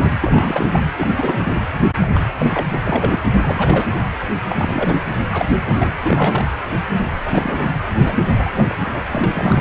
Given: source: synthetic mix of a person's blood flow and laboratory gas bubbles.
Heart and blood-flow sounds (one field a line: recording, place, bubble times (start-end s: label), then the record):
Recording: Doppler ultrasound of blood flow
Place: precordium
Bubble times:
0.00-0.10 s: bubbles
0.21-0.67 s: bubbles
0.72-0.83 s: bubbles
0.96-1.39 s: bubbles
1.43-1.61 s: bubbles
2.00-2.06 s: bubbles
2.15-2.23 s: bubbles
2.29-2.34 s: bubbles
2.38-2.67 s: bubbles
2.70-2.79 s: bubbles
2.87-3.20 s: bubbles
3.41-3.85 s: bubbles
4.49-5.00 s: bubbles
5.31-5.46 s: bubbles
5.65-5.92 s: bubbles
6.02-6.47 s: bubbles
7.25-7.71 s: bubbles
8.04-8.18 s: bubbles
8.29-8.35 s: bubbles
8.38-8.74 s: bubbles
8.80-9.02 s: bubbles
9.07-9.61 s: bubbles
From the record:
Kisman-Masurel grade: 332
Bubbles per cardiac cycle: rolling drumbeat, 9 or more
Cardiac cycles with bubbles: 50 to 99%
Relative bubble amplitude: moderate (0.250 to 0.450)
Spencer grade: 3 (all of the cardiac periods contain showers or single bubble signals, but not dominating or overriding the cardiac motion signals)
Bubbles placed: anywhere in the cardiac cycle